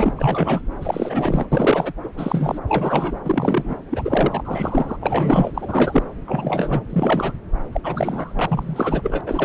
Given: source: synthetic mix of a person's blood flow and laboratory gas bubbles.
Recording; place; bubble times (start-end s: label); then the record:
Doppler ultrasound of blood flow; subclavian vein
0.00-0.12 s: bubbles
0.16-0.62 s: bubbles
0.80-1.46 s: bubbles
1.52-1.93 s: bubbles
2.03-2.09 s: bubbles
2.17-2.59 s: bubbles
2.68-3.17 s: bubbles
3.24-3.77 s: bubbles
3.90-4.97 s: bubbles
5.00-5.51 s: bubbles
5.54-6.03 s: bubbles
6.27-6.83 s: bubbles
6.89-7.32 s: bubbles
7.72-7.81 s: bubbles
7.83-9.21 s: bubbles
9.26-9.45 s: bubbles
From the record:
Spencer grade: 3 (all of the cardiac periods contain showers or single bubble signals, but not dominating or overriding the cardiac motion signals); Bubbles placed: anywhere in the cardiac cycle